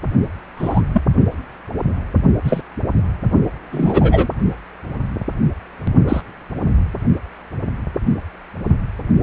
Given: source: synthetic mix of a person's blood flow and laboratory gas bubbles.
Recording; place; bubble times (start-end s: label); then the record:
Doppler ultrasound of blood flow; precordium
0.56-0.82 s: bubbles
0.92-1.02 s: bubbles
2.44-2.61 s: bubbles
3.71-4.28 s: bubbles
6.08-6.21 s: bubbles
From the record:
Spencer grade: 2 (many but less than half of the cardiac periods contain bubble signals, singularly or in groups); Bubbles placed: only in the low amplitude regions of the cardiac cycle